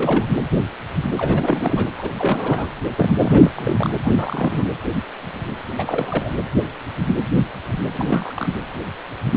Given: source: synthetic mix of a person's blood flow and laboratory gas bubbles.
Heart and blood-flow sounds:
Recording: Doppler ultrasound of blood flow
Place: precordium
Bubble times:
0.00-0.26 s: bubbles
1.18-1.90 s: bubbles
1.98-2.09 s: bubbles
2.18-2.67 s: bubbles
2.96-3.13 s: bubbles
3.18-3.51 s: bubbles
3.55-3.89 s: bubbles
4.04-4.64 s: bubbles
5.71-6.31 s: bubbles
7.94-8.54 s: bubbles
From the record:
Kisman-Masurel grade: 332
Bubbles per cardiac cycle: rolling drumbeat, 9 or more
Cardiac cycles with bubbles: 50 to 99%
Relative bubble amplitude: moderate (0.250 to 0.450)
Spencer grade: 3 (all of the cardiac periods contain showers or single bubble signals, but not dominating or overriding the cardiac motion signals)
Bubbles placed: anywhere in the cardiac cycle

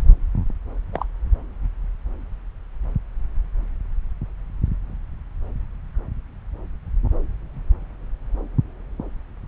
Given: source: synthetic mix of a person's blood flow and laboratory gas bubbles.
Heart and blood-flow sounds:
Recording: Doppler ultrasound of blood flow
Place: subclavian vein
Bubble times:
0.93-1.06 s: bubbles
From the record:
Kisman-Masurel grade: 112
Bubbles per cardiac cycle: 1 to 2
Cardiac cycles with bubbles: 1 to 10%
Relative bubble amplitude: moderate (0.250 to 0.450)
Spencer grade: 1 (occasional bubble signal discernible with the cardiac motion signal, with majority of cardiac periods free of bubbles)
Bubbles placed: anywhere in the cardiac cycle

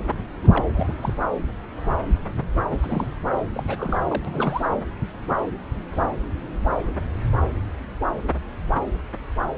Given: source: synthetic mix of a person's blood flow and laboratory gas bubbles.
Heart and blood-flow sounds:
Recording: Doppler ultrasound of blood flow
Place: subclavian vein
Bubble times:
0.06-0.14 s: bubbles
0.42-0.47 s: bubbles
0.53-0.65 s: bubbles
0.75-0.92 s: bubbles
1.00-1.13 s: bubbles
2.69-2.76 s: bubbles
2.81-3.07 s: bubbles
3.54-3.63 s: bubbles
3.67-4.00 s: bubbles
4.08-4.69 s: bubbles
From the record:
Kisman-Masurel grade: 221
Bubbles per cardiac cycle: several, 3 to 8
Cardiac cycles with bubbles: 10 to 50%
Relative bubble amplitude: barely perceptible (0.100 to 0.250)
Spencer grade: 2 (many but less than half of the cardiac periods contain bubble signals, singularly or in groups)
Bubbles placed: anywhere in the cardiac cycle

